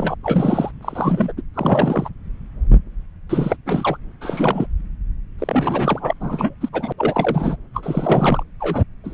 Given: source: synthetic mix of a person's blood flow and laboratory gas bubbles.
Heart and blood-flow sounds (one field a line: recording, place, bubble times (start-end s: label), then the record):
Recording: Doppler ultrasound of blood flow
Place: subclavian vein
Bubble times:
0.00-0.15 s: bubbles
0.23-0.71 s: bubbles
0.83-1.32 s: bubbles
1.37-1.42 s: bubbles
1.54-2.08 s: bubbles
3.29-3.56 s: bubbles
3.66-3.97 s: bubbles
4.21-4.66 s: bubbles
5.38-6.13 s: bubbles
6.20-6.54 s: bubbles
6.61-6.69 s: bubbles
6.72-6.92 s: bubbles
6.97-7.57 s: bubbles
7.74-8.43 s: bubbles
8.60-8.83 s: bubbles
9.04-9.14 s: bubbles
From the record:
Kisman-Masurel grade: 332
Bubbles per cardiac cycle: rolling drumbeat, 9 or more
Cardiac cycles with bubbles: 50 to 99%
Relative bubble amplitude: moderate (0.250 to 0.450)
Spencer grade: 3 (all of the cardiac periods contain showers or single bubble signals, but not dominating or overriding the cardiac motion signals)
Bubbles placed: anywhere in the cardiac cycle